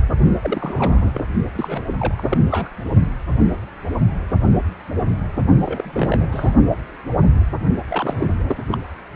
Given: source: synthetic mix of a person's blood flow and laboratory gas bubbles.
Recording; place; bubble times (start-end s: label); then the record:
Doppler ultrasound of blood flow; precordium
0.41-1.11 s: bubbles
1.14-1.24 s: bubbles
1.54-1.84 s: bubbles
1.99-2.38 s: bubbles
2.50-2.68 s: bubbles
5.65-6.27 s: bubbles
6.31-6.54 s: bubbles
7.88-8.13 s: bubbles
8.19-8.27 s: bubbles
8.47-8.56 s: bubbles
8.71-8.77 s: bubbles
From the record:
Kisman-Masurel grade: 232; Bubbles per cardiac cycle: several, 3 to 8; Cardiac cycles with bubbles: 50 to 99%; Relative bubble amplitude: moderate (0.250 to 0.450); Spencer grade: 3 (all of the cardiac periods contain showers or single bubble signals, but not dominating or overriding the cardiac motion signals); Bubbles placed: only in the low amplitude regions of the cardiac cycle